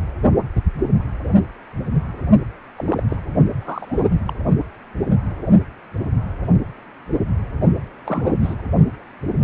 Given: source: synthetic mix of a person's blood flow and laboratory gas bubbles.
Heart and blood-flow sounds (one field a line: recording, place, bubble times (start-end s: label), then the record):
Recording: Doppler ultrasound of blood flow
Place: precordium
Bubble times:
2.77-3.03 s: bubbles
3.10-3.17 s: bubbles
3.60-4.20 s: bubbles
4.26-4.33 s: bubbles
8.06-8.55 s: bubbles
From the record:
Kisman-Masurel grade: 221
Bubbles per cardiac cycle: several, 3 to 8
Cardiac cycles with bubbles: 10 to 50%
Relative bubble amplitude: barely perceptible (0.100 to 0.250)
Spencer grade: 2 (many but less than half of the cardiac periods contain bubble signals, singularly or in groups)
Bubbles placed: only in the low amplitude regions of the cardiac cycle